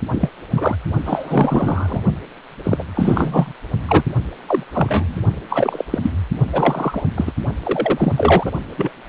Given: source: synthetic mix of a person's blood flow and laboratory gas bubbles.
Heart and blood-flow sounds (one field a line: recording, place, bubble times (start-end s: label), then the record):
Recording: Doppler ultrasound of blood flow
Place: precordium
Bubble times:
0.11-0.30 s: bubbles
0.56-0.75 s: bubbles
1.05-2.00 s: bubbles
2.63-2.83 s: bubbles
2.94-3.53 s: bubbles
3.88-4.04 s: bubbles
4.46-4.63 s: bubbles
4.72-5.24 s: bubbles
5.50-5.84 s: bubbles
5.90-5.98 s: bubbles
6.01-6.11 s: bubbles
6.53-7.04 s: bubbles
7.16-7.32 s: bubbles
7.63-8.13 s: bubbles
8.17-8.52 s: bubbles
8.77-8.91 s: bubbles
From the record:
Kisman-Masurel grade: 233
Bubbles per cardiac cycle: several, 3 to 8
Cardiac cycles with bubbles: 50 to 99%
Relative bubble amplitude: loud (0.450 to 0.775)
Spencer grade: 3 (all of the cardiac periods contain showers or single bubble signals, but not dominating or overriding the cardiac motion signals)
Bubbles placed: only in the low amplitude regions of the cardiac cycle